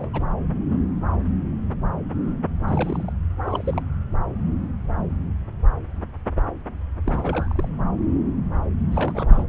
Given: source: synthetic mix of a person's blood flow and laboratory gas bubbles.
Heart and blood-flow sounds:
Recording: Doppler ultrasound of blood flow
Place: subclavian vein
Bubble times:
0.00-0.10 s: bubbles
0.13-0.23 s: bubbles
2.67-3.12 s: bubbles
3.42-3.82 s: bubbles
7.04-7.53 s: bubbles
7.55-7.68 s: bubbles
8.91-9.43 s: bubbles
From the record:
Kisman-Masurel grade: 221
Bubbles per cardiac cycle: several, 3 to 8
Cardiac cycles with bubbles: 10 to 50%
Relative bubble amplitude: barely perceptible (0.100 to 0.250)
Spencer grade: 2 (many but less than half of the cardiac periods contain bubble signals, singularly or in groups)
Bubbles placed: anywhere in the cardiac cycle

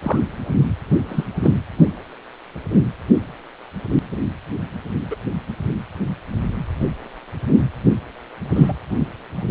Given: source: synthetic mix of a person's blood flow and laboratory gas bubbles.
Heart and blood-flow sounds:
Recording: Doppler ultrasound of blood flow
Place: precordium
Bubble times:
0.01-0.19 s: bubbles
1.08-1.24 s: bubbles
1.42-1.52 s: bubbles
5.10-5.17 s: bubbles
8.55-8.75 s: bubbles
From the record:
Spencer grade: 2 (many but less than half of the cardiac periods contain bubble signals, singularly or in groups)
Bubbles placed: anywhere in the cardiac cycle

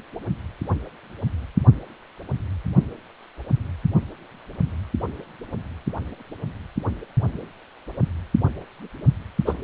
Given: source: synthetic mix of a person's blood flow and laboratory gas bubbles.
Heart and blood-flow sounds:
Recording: Doppler ultrasound of blood flow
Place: precordium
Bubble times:
9.46-9.53 s: bubbles
From the record:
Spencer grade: 1 (occasional bubble signal discernible with the cardiac motion signal, with majority of cardiac periods free of bubbles)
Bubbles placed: only in the low amplitude regions of the cardiac cycle

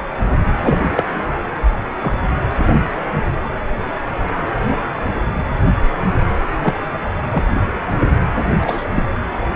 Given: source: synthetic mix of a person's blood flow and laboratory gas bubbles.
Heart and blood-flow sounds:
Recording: Doppler ultrasound of blood flow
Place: precordium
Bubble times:
0.60-0.79 s: bubbles
0.95-1.04 s: bubbles
2.02-2.14 s: bubbles
4.71-4.77 s: bubbles
6.62-6.74 s: bubbles
7.30-7.43 s: bubbles
8.61-8.85 s: bubbles
8.95-9.08 s: bubbles
From the record:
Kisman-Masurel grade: 123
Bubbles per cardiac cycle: 1 to 2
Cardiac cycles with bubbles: 10 to 50%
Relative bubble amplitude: loud (0.450 to 0.775)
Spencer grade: 2 (many but less than half of the cardiac periods contain bubble signals, singularly or in groups)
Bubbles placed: anywhere in the cardiac cycle

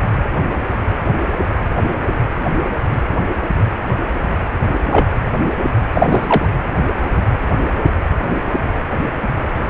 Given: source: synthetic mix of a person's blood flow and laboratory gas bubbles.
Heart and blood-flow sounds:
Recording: Doppler ultrasound of blood flow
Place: precordium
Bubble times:
4.90-5.07 s: bubbles
5.93-6.45 s: bubbles
From the record:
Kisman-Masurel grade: 213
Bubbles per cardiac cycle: several, 3 to 8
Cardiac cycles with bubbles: 1 to 10%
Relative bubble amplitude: loud (0.450 to 0.775)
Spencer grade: 1 (occasional bubble signal discernible with the cardiac motion signal, with majority of cardiac periods free of bubbles)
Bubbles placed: anywhere in the cardiac cycle

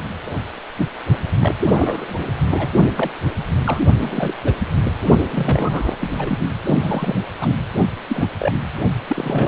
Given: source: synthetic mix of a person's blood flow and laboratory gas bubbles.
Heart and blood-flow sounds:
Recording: Doppler ultrasound of blood flow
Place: precordium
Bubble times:
0.25-0.30 s: bubbles
0.77-0.87 s: bubbles
1.40-1.54 s: bubbles
1.71-2.28 s: bubbles
2.50-2.67 s: bubbles
2.96-3.10 s: bubbles
3.66-3.79 s: bubbles
3.99-4.34 s: bubbles
4.43-4.54 s: bubbles
5.33-5.97 s: bubbles
6.00-6.38 s: bubbles
6.63-7.16 s: bubbles
7.40-7.56 s: bubbles
8.07-8.30 s: bubbles
8.38-8.52 s: bubbles
9.07-9.47 s: bubbles
From the record:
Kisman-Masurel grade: 242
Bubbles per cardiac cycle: several, 3 to 8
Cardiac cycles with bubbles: 100%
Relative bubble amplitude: moderate (0.250 to 0.450)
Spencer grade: 3 (all of the cardiac periods contain showers or single bubble signals, but not dominating or overriding the cardiac motion signals)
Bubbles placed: only in the low amplitude regions of the cardiac cycle

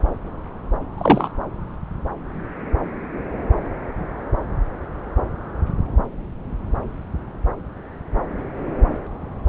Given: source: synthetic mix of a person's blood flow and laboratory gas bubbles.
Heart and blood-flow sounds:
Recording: Doppler ultrasound of blood flow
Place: subclavian vein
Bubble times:
0.98-1.31 s: bubbles
From the record:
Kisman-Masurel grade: 213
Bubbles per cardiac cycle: several, 3 to 8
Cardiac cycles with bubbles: 1 to 10%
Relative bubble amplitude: loud (0.450 to 0.775)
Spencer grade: 1 (occasional bubble signal discernible with the cardiac motion signal, with majority of cardiac periods free of bubbles)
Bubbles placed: anywhere in the cardiac cycle

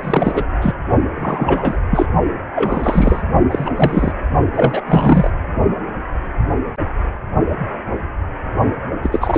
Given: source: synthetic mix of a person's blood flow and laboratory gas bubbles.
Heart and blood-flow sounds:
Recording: Doppler ultrasound of blood flow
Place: precordium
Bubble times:
0.00-0.45 s: bubbles
0.61-0.74 s: bubbles
1.16-1.78 s: bubbles
1.91-2.06 s: bubbles
2.55-3.22 s: bubbles
3.51-3.71 s: bubbles
3.76-4.12 s: bubbles
4.54-4.81 s: bubbles
4.86-5.30 s: bubbles
9.03-9.09 s: bubbles
9.12-9.38 s: bubbles
From the record:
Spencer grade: 3 (all of the cardiac periods contain showers or single bubble signals, but not dominating or overriding the cardiac motion signals)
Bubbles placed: only in the low amplitude regions of the cardiac cycle

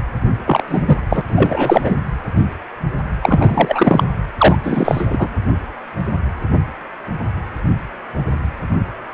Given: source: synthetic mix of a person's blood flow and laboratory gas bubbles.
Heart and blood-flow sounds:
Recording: Doppler ultrasound of blood flow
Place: precordium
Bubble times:
0.46-0.62 s: bubbles
0.68-1.02 s: bubbles
1.09-1.22 s: bubbles
1.28-1.96 s: bubbles
3.22-4.04 s: bubbles
4.38-4.57 s: bubbles
4.64-5.06 s: bubbles
5.10-5.29 s: bubbles
From the record:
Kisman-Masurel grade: 223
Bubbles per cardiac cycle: several, 3 to 8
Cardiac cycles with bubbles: 10 to 50%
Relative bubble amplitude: loud (0.450 to 0.775)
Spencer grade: 2 (many but less than half of the cardiac periods contain bubble signals, singularly or in groups)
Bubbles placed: anywhere in the cardiac cycle

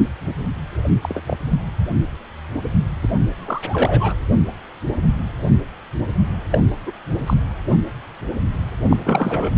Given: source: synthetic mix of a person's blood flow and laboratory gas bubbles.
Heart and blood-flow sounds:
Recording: Doppler ultrasound of blood flow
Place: precordium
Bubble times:
1.02-1.21 s: bubbles
1.27-1.37 s: bubbles
3.02-3.08 s: bubbles
3.37-4.15 s: bubbles
6.51-6.58 s: bubbles
6.85-6.92 s: bubbles
7.26-7.34 s: bubbles
8.90-9.51 s: bubbles
From the record:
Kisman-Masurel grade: 222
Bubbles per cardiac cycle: several, 3 to 8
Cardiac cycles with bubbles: 10 to 50%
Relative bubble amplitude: moderate (0.250 to 0.450)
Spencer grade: 2 (many but less than half of the cardiac periods contain bubble signals, singularly or in groups)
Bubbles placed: anywhere in the cardiac cycle

